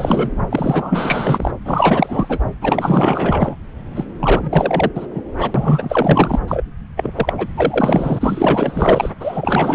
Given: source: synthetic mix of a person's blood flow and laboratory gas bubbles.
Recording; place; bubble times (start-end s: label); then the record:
Doppler ultrasound of blood flow; subclavian vein
0.00-0.30 s: bubbles
0.49-1.51 s: bubbles
1.65-2.40 s: bubbles
2.61-3.56 s: bubbles
3.95-4.04 s: bubbles
4.19-4.90 s: bubbles
4.94-5.06 s: bubbles
5.10-5.21 s: bubbles
5.38-5.51 s: bubbles
5.54-6.39 s: bubbles
6.47-6.64 s: bubbles
6.96-7.33 s: bubbles
7.38-7.47 s: bubbles
7.55-9.12 s: bubbles
9.20-9.75 s: bubbles
From the record:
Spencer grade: 4 (maximum detectable bubble signal sounding continuously throughout systole and diastole of every cardiac period, and overriding the amplitude of the normal cardiac signals); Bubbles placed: anywhere in the cardiac cycle